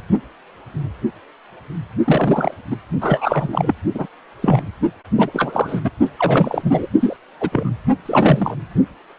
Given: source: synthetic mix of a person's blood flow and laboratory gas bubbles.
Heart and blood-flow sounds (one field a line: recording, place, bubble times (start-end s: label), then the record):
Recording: Doppler ultrasound of blood flow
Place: precordium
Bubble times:
2.04-2.54 s: bubbles
2.70-2.76 s: bubbles
3.01-3.73 s: bubbles
3.94-4.07 s: bubbles
4.42-4.61 s: bubbles
5.16-5.80 s: bubbles
5.84-5.90 s: bubbles
6.17-6.87 s: bubbles
7.00-7.17 s: bubbles
7.40-7.73 s: bubbles
8.05-8.56 s: bubbles
From the record:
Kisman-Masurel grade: 233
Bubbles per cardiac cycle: several, 3 to 8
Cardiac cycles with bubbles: 50 to 99%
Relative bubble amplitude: loud (0.450 to 0.775)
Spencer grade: 3 (all of the cardiac periods contain showers or single bubble signals, but not dominating or overriding the cardiac motion signals)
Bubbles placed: only in the low amplitude regions of the cardiac cycle